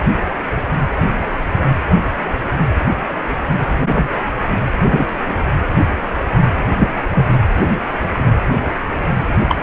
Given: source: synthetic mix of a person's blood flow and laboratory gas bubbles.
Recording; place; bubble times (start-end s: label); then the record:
Doppler ultrasound of blood flow; precordium
3.67-3.85 s: bubbles
3.88-4.08 s: bubbles
4.83-5.05 s: bubbles
6.79-6.88 s: bubbles
7.14-7.32 s: bubbles
9.49-9.57 s: bubbles
From the record:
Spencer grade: 2 (many but less than half of the cardiac periods contain bubble signals, singularly or in groups); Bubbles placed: anywhere in the cardiac cycle